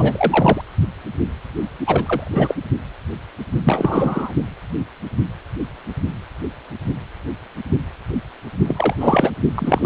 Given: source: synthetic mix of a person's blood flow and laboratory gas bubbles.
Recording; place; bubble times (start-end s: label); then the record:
Doppler ultrasound of blood flow; precordium
0.00-0.61 s: bubbles
1.85-2.54 s: bubbles
3.64-4.33 s: bubbles
8.66-8.95 s: bubbles
9.00-9.30 s: bubbles
9.54-9.86 s: bubbles
From the record:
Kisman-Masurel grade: 223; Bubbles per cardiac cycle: several, 3 to 8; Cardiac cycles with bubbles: 10 to 50%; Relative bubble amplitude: loud (0.450 to 0.775); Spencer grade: 2 (many but less than half of the cardiac periods contain bubble signals, singularly or in groups); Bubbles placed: only in the low amplitude regions of the cardiac cycle